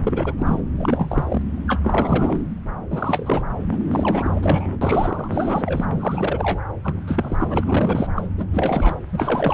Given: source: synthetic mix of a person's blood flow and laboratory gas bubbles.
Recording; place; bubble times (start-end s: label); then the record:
Doppler ultrasound of blood flow; subclavian vein
0.07-0.33 s: bubbles
0.38-0.61 s: bubbles
0.78-1.42 s: bubbles
1.68-1.80 s: bubbles
1.84-2.43 s: bubbles
2.90-3.42 s: bubbles
3.71-3.77 s: bubbles
3.92-4.79 s: bubbles
4.81-5.28 s: bubbles
5.31-5.86 s: bubbles
6.00-6.61 s: bubbles
6.84-6.94 s: bubbles
7.07-7.36 s: bubbles
7.38-7.64 s: bubbles
7.67-8.08 s: bubbles
8.16-8.27 s: bubbles
8.38-8.45 s: bubbles
8.51-9.00 s: bubbles
9.12-9.54 s: bubbles
From the record:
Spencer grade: 3 (all of the cardiac periods contain showers or single bubble signals, but not dominating or overriding the cardiac motion signals); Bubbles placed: anywhere in the cardiac cycle